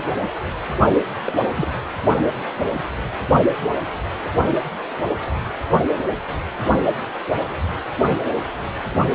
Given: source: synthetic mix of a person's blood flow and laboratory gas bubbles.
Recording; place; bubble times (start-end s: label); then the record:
Doppler ultrasound of blood flow; precordium
1.26-1.33 s: bubbles
1.55-1.72 s: bubbles
From the record:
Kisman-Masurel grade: 112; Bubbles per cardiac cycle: 1 to 2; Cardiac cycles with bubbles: 1 to 10%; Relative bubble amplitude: moderate (0.250 to 0.450); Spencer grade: 1 (occasional bubble signal discernible with the cardiac motion signal, with majority of cardiac periods free of bubbles); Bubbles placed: only in the low amplitude regions of the cardiac cycle